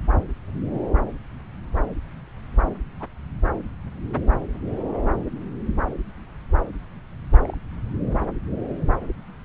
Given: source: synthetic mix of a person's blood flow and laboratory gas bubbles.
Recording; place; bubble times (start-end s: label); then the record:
Doppler ultrasound of blood flow; subclavian vein
2.62-2.74 s: bubbles
3.00-3.04 s: bubbles
7.40-7.56 s: bubbles
From the record:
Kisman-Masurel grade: 121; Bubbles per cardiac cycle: 1 to 2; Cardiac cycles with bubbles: 10 to 50%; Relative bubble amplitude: barely perceptible (0.100 to 0.250); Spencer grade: 2 (many but less than half of the cardiac periods contain bubble signals, singularly or in groups); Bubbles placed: anywhere in the cardiac cycle